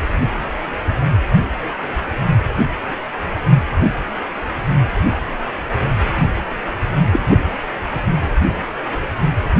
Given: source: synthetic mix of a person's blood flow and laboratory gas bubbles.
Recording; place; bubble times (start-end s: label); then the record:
Doppler ultrasound of blood flow; precordium
7.12-7.20 s: bubbles
7.28-7.50 s: bubbles
From the record:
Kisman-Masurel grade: 113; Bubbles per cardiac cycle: 1 to 2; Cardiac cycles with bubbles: 1 to 10%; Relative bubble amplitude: loud (0.450 to 0.775); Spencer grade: 1 (occasional bubble signal discernible with the cardiac motion signal, with majority of cardiac periods free of bubbles); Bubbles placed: anywhere in the cardiac cycle